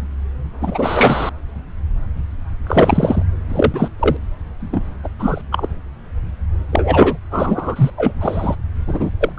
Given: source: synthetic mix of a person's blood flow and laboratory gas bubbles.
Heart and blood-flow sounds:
Doppler ultrasound of blood flow; subclavian vein
0.61-1.29 s: bubbles
2.67-3.23 s: bubbles
3.49-3.88 s: bubbles
3.99-4.17 s: bubbles
4.60-4.95 s: bubbles
5.04-5.08 s: bubbles
5.19-5.42 s: bubbles
5.51-5.67 s: bubbles
6.72-7.17 s: bubbles
7.31-7.90 s: bubbles
7.97-8.12 s: bubbles
8.20-8.56 s: bubbles
8.87-9.11 s: bubbles
9.21-9.32 s: bubbles
9.36-9.39 s: bubbles
From the record:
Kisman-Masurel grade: 233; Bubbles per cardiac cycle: several, 3 to 8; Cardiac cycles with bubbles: 50 to 99%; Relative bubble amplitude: loud (0.450 to 0.775); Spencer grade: 3 (all of the cardiac periods contain showers or single bubble signals, but not dominating or overriding the cardiac motion signals); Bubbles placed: anywhere in the cardiac cycle

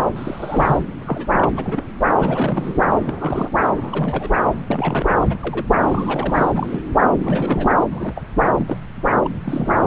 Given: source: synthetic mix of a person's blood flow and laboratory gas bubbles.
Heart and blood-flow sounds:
Doppler ultrasound of blood flow; subclavian vein
0.00-0.04 s: bubbles
0.15-0.78 s: bubbles
1.06-1.50 s: bubbles
1.54-1.83 s: bubbles
2.17-2.79 s: bubbles
3.04-3.51 s: bubbles
3.77-4.29 s: bubbles
4.70-5.08 s: bubbles
5.21-5.66 s: bubbles
5.87-6.80 s: bubbles
7.19-7.75 s: bubbles
7.91-8.23 s: bubbles
8.57-8.79 s: bubbles
9.23-9.29 s: bubbles
9.45-9.70 s: bubbles
9.81-9.87 s: bubbles
From the record:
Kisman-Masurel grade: 242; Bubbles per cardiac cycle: several, 3 to 8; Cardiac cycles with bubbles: 100%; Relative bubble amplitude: moderate (0.250 to 0.450); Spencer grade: 3 (all of the cardiac periods contain showers or single bubble signals, but not dominating or overriding the cardiac motion signals); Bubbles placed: anywhere in the cardiac cycle

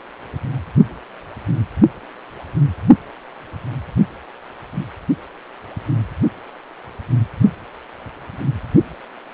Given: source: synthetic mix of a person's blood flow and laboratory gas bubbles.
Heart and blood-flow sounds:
Doppler ultrasound of blood flow; precordium
4.74-4.87 s: bubbles
From the record:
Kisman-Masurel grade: 111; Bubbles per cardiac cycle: 1 to 2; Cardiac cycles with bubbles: 1 to 10%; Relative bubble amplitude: barely perceptible (0.100 to 0.250); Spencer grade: 1 (occasional bubble signal discernible with the cardiac motion signal, with majority of cardiac periods free of bubbles); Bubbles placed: only in the low amplitude regions of the cardiac cycle

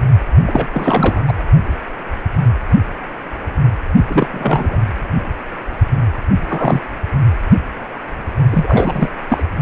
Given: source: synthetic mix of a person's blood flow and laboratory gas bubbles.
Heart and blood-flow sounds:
Doppler ultrasound of blood flow; precordium
0.46-0.67 s: bubbles
0.73-1.32 s: bubbles
4.08-4.27 s: bubbles
4.31-4.80 s: bubbles
6.49-6.82 s: bubbles
8.51-9.09 s: bubbles
9.29-9.43 s: bubbles
From the record:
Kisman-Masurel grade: 223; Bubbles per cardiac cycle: several, 3 to 8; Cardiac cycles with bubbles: 10 to 50%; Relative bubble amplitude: loud (0.450 to 0.775); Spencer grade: 2 (many but less than half of the cardiac periods contain bubble signals, singularly or in groups); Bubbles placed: anywhere in the cardiac cycle

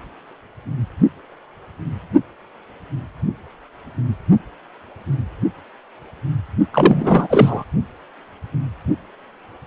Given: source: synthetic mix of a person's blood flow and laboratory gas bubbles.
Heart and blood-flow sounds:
Doppler ultrasound of blood flow; precordium
6.73-7.65 s: bubbles
From the record:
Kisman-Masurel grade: 213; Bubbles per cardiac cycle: several, 3 to 8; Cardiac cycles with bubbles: 1 to 10%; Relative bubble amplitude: loud (0.450 to 0.775); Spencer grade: 1 (occasional bubble signal discernible with the cardiac motion signal, with majority of cardiac periods free of bubbles); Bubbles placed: only in the low amplitude regions of the cardiac cycle

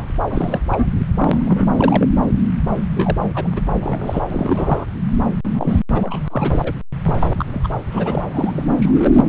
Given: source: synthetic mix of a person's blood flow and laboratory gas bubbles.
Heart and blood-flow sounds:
Doppler ultrasound of blood flow; subclavian vein
0.00-0.09 s: bubbles
0.30-0.59 s: bubbles
0.71-0.85 s: bubbles
1.17-2.08 s: bubbles
2.95-3.17 s: bubbles
3.33-3.61 s: bubbles
3.81-4.21 s: bubbles
4.30-4.85 s: bubbles
5.44-5.79 s: bubbles
5.94-6.59 s: bubbles
6.62-6.72 s: bubbles
7.02-7.45 s: bubbles
7.51-7.68 s: bubbles
7.90-8.26 s: bubbles
8.31-8.65 s: bubbles
8.76-9.25 s: bubbles
From the record:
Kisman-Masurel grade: 342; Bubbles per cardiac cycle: rolling drumbeat, 9 or more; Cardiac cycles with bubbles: 100%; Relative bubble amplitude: moderate (0.250 to 0.450); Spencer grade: 3 (all of the cardiac periods contain showers or single bubble signals, but not dominating or overriding the cardiac motion signals); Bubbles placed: anywhere in the cardiac cycle

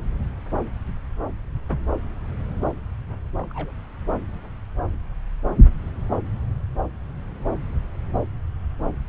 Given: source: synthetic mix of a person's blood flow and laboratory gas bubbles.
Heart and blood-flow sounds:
Doppler ultrasound of blood flow; subclavian vein
3.38-3.47 s: bubbles
3.50-3.72 s: bubbles
From the record:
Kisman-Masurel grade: 111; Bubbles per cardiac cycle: 1 to 2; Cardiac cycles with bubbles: 1 to 10%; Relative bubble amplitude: barely perceptible (0.100 to 0.250); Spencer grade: 1 (occasional bubble signal discernible with the cardiac motion signal, with majority of cardiac periods free of bubbles); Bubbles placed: anywhere in the cardiac cycle

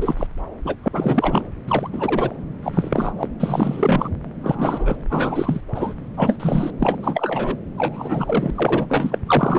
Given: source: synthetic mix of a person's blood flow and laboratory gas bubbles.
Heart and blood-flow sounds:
Doppler ultrasound of blood flow; subclavian vein
0.00-0.27 s: bubbles
0.65-0.75 s: bubbles
0.84-0.88 s: bubbles
0.93-1.44 s: bubbles
1.67-1.90 s: bubbles
1.93-2.35 s: bubbles
2.63-3.12 s: bubbles
3.18-3.28 s: bubbles
3.40-4.09 s: bubbles
4.43-4.96 s: bubbles
5.10-5.61 s: bubbles
5.75-5.94 s: bubbles
6.17-6.36 s: bubbles
6.40-6.71 s: bubbles
6.80-7.58 s: bubbles
7.77-8.51 s: bubbles
8.55-8.86 s: bubbles
8.88-9.19 s: bubbles
9.27-9.59 s: bubbles
From the record:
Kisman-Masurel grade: 342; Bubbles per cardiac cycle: rolling drumbeat, 9 or more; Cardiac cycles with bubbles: 100%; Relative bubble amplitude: moderate (0.250 to 0.450); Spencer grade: 3 (all of the cardiac periods contain showers or single bubble signals, but not dominating or overriding the cardiac motion signals); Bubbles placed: anywhere in the cardiac cycle

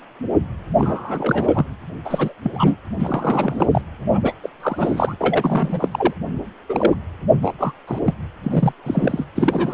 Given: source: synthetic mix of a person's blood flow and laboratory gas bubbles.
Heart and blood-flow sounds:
Doppler ultrasound of blood flow; precordium
0.78-1.66 s: bubbles
2.04-2.33 s: bubbles
2.42-2.52 s: bubbles
2.54-2.76 s: bubbles
2.99-3.67 s: bubbles
3.71-3.81 s: bubbles
4.10-4.33 s: bubbles
4.42-4.50 s: bubbles
4.60-5.15 s: bubbles
5.20-5.88 s: bubbles
5.92-6.13 s: bubbles
6.69-6.95 s: bubbles
7.42-7.53 s: bubbles
7.58-7.72 s: bubbles
7.87-7.99 s: bubbles
8.05-8.13 s: bubbles
8.44-8.74 s: bubbles
8.85-9.26 s: bubbles
9.36-9.73 s: bubbles
From the record:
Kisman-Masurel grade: 333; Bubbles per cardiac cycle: rolling drumbeat, 9 or more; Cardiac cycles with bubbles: 50 to 99%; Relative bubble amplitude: loud (0.450 to 0.775); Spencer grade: 3 (all of the cardiac periods contain showers or single bubble signals, but not dominating or overriding the cardiac motion signals); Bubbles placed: anywhere in the cardiac cycle

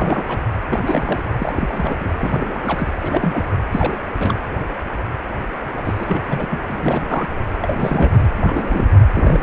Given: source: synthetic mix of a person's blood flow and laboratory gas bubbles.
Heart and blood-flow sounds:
Doppler ultrasound of blood flow; precordium
0.00-0.23 s: bubbles
0.27-0.41 s: bubbles
0.69-1.23 s: bubbles
1.38-2.10 s: bubbles
2.18-2.89 s: bubbles
3.00-3.45 s: bubbles
3.50-3.57 s: bubbles
3.71-3.97 s: bubbles
4.19-4.46 s: bubbles
5.76-6.22 s: bubbles
6.26-6.47 s: bubbles
6.50-6.59 s: bubbles
6.70-7.26 s: bubbles
7.62-8.29 s: bubbles
8.41-8.89 s: bubbles
9.14-9.43 s: bubbles
From the record:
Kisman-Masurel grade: 332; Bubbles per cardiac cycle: rolling drumbeat, 9 or more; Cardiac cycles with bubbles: 50 to 99%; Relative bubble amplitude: moderate (0.250 to 0.450); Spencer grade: 3 (all of the cardiac periods contain showers or single bubble signals, but not dominating or overriding the cardiac motion signals); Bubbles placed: anywhere in the cardiac cycle

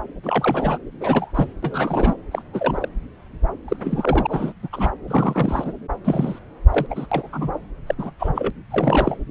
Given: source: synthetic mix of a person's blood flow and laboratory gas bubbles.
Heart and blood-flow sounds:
Doppler ultrasound of blood flow; subclavian vein
0.23-0.78 s: bubbles
1.00-1.31 s: bubbles
1.35-1.47 s: bubbles
1.62-2.15 s: bubbles
2.31-2.42 s: bubbles
2.53-2.88 s: bubbles
3.68-3.77 s: bubbles
3.79-4.53 s: bubbles
4.62-4.69 s: bubbles
4.73-4.91 s: bubbles
5.08-5.72 s: bubbles
6.04-6.39 s: bubbles
6.71-6.87 s: bubbles
6.90-7.06 s: bubbles
7.12-7.29 s: bubbles
7.33-7.51 s: bubbles
7.87-7.95 s: bubbles
7.98-8.12 s: bubbles
8.19-8.51 s: bubbles
8.71-9.17 s: bubbles
From the record:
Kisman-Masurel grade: 232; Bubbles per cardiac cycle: several, 3 to 8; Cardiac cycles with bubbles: 50 to 99%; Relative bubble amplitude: moderate (0.250 to 0.450); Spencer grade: 3 (all of the cardiac periods contain showers or single bubble signals, but not dominating or overriding the cardiac motion signals); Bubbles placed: anywhere in the cardiac cycle

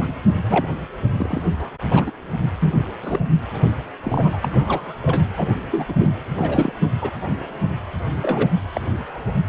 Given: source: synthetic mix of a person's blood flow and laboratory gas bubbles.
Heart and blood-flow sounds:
Doppler ultrasound of blood flow; precordium
0.00-0.07 s: bubbles
0.49-0.66 s: bubbles
1.19-1.42 s: bubbles
1.60-1.71 s: bubbles
1.91-2.11 s: bubbles
2.61-2.75 s: bubbles
3.02-3.20 s: bubbles
3.70-3.73 s: bubbles
4.03-4.95 s: bubbles
5.02-5.22 s: bubbles
5.37-5.48 s: bubbles
5.71-5.94 s: bubbles
5.99-6.10 s: bubbles
6.35-6.73 s: bubbles
7.01-7.10 s: bubbles
8.22-8.49 s: bubbles
8.75-8.81 s: bubbles
From the record:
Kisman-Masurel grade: 232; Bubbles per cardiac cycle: several, 3 to 8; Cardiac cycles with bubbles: 50 to 99%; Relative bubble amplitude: moderate (0.250 to 0.450); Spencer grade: 3 (all of the cardiac periods contain showers or single bubble signals, but not dominating or overriding the cardiac motion signals); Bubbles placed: anywhere in the cardiac cycle

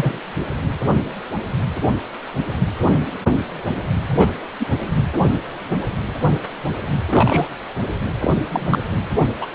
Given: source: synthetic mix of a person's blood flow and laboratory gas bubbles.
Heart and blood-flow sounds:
Doppler ultrasound of blood flow; precordium
0.00-0.21 s: bubbles
4.08-4.30 s: bubbles
4.59-4.66 s: bubbles
7.10-7.47 s: bubbles
8.21-8.34 s: bubbles
8.51-8.79 s: bubbles
9.39-9.46 s: bubbles
From the record:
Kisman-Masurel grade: 123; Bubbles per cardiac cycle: 1 to 2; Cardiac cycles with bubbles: 10 to 50%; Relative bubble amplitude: loud (0.450 to 0.775); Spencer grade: 2 (many but less than half of the cardiac periods contain bubble signals, singularly or in groups); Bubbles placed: anywhere in the cardiac cycle

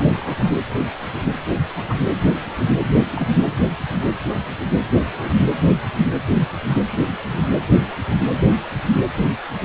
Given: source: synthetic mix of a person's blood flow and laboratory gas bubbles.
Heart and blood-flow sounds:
Doppler ultrasound of blood flow; precordium
0.17-0.56 s: bubbles
1.75-1.94 s: bubbles
3.15-3.27 s: bubbles
3.44-3.52 s: bubbles
5.18-5.35 s: bubbles
7.31-7.48 s: bubbles
From the record:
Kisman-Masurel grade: 122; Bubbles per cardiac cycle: 1 to 2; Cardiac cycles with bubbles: 10 to 50%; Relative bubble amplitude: moderate (0.250 to 0.450); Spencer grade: 2 (many but less than half of the cardiac periods contain bubble signals, singularly or in groups); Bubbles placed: anywhere in the cardiac cycle

